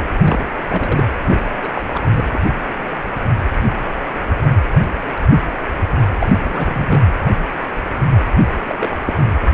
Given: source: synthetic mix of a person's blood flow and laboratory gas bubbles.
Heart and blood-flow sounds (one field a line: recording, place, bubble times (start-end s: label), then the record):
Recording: Doppler ultrasound of blood flow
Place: precordium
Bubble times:
0.24-0.45 s: bubbles
0.69-1.05 s: bubbles
1.27-1.42 s: bubbles
1.62-1.69 s: bubbles
1.75-1.83 s: bubbles
1.93-2.01 s: bubbles
2.15-2.24 s: bubbles
2.32-2.39 s: bubbles
6.21-6.26 s: bubbles
6.43-7.12 s: bubbles
8.68-8.89 s: bubbles
9.06-9.13 s: bubbles
9.19-9.23 s: bubbles
From the record:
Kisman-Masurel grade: 222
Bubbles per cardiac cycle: several, 3 to 8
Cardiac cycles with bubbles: 10 to 50%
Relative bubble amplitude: moderate (0.250 to 0.450)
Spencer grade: 2 (many but less than half of the cardiac periods contain bubble signals, singularly or in groups)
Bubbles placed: anywhere in the cardiac cycle